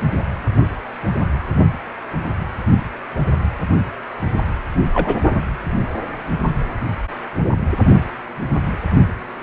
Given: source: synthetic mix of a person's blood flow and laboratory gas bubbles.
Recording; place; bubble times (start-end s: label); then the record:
Doppler ultrasound of blood flow; precordium
4.94-5.21 s: bubbles
From the record:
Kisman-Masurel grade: 122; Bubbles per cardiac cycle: 1 to 2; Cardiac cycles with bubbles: 10 to 50%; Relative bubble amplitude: moderate (0.250 to 0.450); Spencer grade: 2 (many but less than half of the cardiac periods contain bubble signals, singularly or in groups); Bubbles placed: anywhere in the cardiac cycle